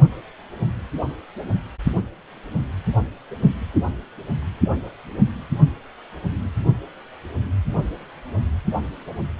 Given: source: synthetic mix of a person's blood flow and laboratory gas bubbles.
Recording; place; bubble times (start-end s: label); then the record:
Doppler ultrasound of blood flow; precordium
no bubbles
From the record:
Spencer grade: 0 (complete lack of bubble signals)